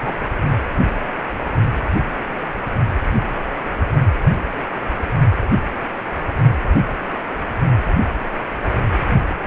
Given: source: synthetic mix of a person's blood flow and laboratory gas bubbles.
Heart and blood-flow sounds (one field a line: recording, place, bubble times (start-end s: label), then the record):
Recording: Doppler ultrasound of blood flow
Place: precordium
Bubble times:
0.00-0.13 s: bubbles
From the record:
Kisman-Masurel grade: 112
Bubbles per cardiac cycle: 1 to 2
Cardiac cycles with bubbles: 1 to 10%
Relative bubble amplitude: moderate (0.250 to 0.450)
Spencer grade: 1 (occasional bubble signal discernible with the cardiac motion signal, with majority of cardiac periods free of bubbles)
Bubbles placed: anywhere in the cardiac cycle